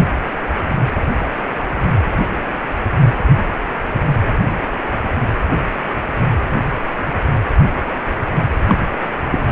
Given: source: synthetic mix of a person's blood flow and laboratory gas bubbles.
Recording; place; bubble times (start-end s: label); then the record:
Doppler ultrasound of blood flow; precordium
8.67-8.75 s: bubbles
9.31-9.46 s: bubbles
From the record:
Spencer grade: 1 (occasional bubble signal discernible with the cardiac motion signal, with majority of cardiac periods free of bubbles); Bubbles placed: anywhere in the cardiac cycle